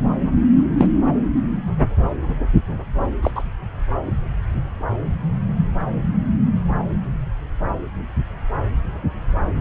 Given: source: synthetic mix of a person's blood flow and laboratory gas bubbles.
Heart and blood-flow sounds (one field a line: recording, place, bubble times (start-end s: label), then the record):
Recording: Doppler ultrasound of blood flow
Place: subclavian vein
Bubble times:
0.77-0.86 s: bubbles
3.22-3.31 s: bubbles
3.35-3.43 s: bubbles
From the record:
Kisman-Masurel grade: 123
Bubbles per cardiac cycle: 1 to 2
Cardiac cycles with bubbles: 10 to 50%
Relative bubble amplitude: loud (0.450 to 0.775)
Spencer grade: 2 (many but less than half of the cardiac periods contain bubble signals, singularly or in groups)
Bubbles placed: anywhere in the cardiac cycle